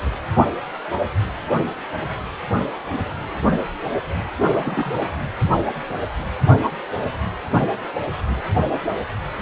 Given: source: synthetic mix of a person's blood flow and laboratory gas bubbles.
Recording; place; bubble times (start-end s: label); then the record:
Doppler ultrasound of blood flow; precordium
4.43-4.92 s: bubbles
From the record:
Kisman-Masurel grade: 111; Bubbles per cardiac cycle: 1 to 2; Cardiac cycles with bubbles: 1 to 10%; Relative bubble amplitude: barely perceptible (0.100 to 0.250); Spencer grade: 1 (occasional bubble signal discernible with the cardiac motion signal, with majority of cardiac periods free of bubbles); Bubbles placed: anywhere in the cardiac cycle